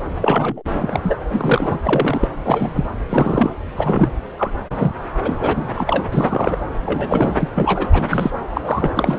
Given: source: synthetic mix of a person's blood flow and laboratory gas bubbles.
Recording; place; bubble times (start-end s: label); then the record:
Doppler ultrasound of blood flow; subclavian vein
0.21-0.62 s: bubbles
0.73-1.00 s: bubbles
1.02-1.16 s: bubbles
1.28-1.79 s: bubbles
1.83-2.29 s: bubbles
2.45-2.87 s: bubbles
3.10-3.50 s: bubbles
3.76-4.10 s: bubbles
4.38-4.51 s: bubbles
4.75-4.90 s: bubbles
5.23-5.68 s: bubbles
5.74-6.05 s: bubbles
6.12-6.63 s: bubbles
6.85-7.36 s: bubbles
7.40-7.49 s: bubbles
7.55-7.89 s: bubbles
7.92-8.30 s: bubbles
8.49-8.91 s: bubbles
8.96-9.19 s: bubbles
From the record:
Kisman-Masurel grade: 243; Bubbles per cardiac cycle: several, 3 to 8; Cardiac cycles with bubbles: 100%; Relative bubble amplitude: loud (0.450 to 0.775); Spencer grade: 3 (all of the cardiac periods contain showers or single bubble signals, but not dominating or overriding the cardiac motion signals); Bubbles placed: anywhere in the cardiac cycle